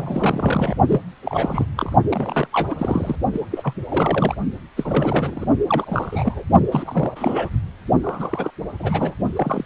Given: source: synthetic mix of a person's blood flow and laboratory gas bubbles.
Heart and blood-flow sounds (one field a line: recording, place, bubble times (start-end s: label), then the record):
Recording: Doppler ultrasound of blood flow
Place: precordium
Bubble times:
0.00-0.76 s: bubbles
0.89-1.01 s: bubbles
1.25-1.65 s: bubbles
1.77-1.92 s: bubbles
2.09-2.47 s: bubbles
2.52-3.15 s: bubbles
3.32-3.44 s: bubbles
3.51-3.74 s: bubbles
3.88-4.34 s: bubbles
4.76-5.46 s: bubbles
5.67-6.43 s: bubbles
6.71-7.49 s: bubbles
8.03-8.51 s: bubbles
8.79-9.14 s: bubbles
9.36-9.64 s: bubbles
From the record:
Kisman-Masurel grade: 332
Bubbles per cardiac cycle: rolling drumbeat, 9 or more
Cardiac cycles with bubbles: 50 to 99%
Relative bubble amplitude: moderate (0.250 to 0.450)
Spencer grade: 3 (all of the cardiac periods contain showers or single bubble signals, but not dominating or overriding the cardiac motion signals)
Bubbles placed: only in the low amplitude regions of the cardiac cycle